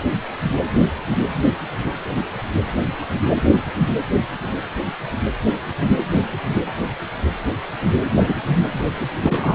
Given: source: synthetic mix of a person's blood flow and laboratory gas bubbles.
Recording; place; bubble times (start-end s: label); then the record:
Doppler ultrasound of blood flow; precordium
8.16-8.35 s: bubbles
9.15-9.55 s: bubbles
From the record:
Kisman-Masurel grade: 223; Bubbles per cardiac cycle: several, 3 to 8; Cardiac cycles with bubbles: 10 to 50%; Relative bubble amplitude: loud (0.450 to 0.775); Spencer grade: 2 (many but less than half of the cardiac periods contain bubble signals, singularly or in groups); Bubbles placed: anywhere in the cardiac cycle